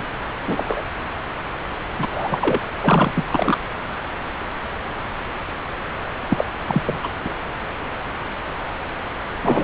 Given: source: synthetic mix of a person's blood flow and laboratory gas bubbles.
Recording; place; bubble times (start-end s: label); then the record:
Doppler ultrasound of blood flow; subclavian vein
0.00-0.05 s: bubbles
0.47-0.82 s: bubbles
1.98-2.38 s: bubbles
2.40-2.59 s: bubbles
2.81-3.12 s: bubbles
3.15-3.58 s: bubbles
6.29-6.45 s: bubbles
6.67-6.82 s: bubbles
6.85-6.98 s: bubbles
7.03-7.10 s: bubbles
7.24-7.33 s: bubbles
9.42-9.64 s: bubbles
From the record:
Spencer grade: 3 (all of the cardiac periods contain showers or single bubble signals, but not dominating or overriding the cardiac motion signals); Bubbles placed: anywhere in the cardiac cycle